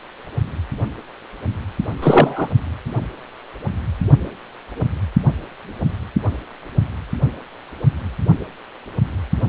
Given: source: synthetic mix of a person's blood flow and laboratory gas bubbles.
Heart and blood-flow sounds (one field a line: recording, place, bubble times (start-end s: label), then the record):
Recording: Doppler ultrasound of blood flow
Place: precordium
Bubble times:
2.02-2.48 s: bubbles
From the record:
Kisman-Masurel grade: 223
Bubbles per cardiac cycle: several, 3 to 8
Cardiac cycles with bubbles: 10 to 50%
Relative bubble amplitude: loud (0.450 to 0.775)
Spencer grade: 2 (many but less than half of the cardiac periods contain bubble signals, singularly or in groups)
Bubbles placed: only in the low amplitude regions of the cardiac cycle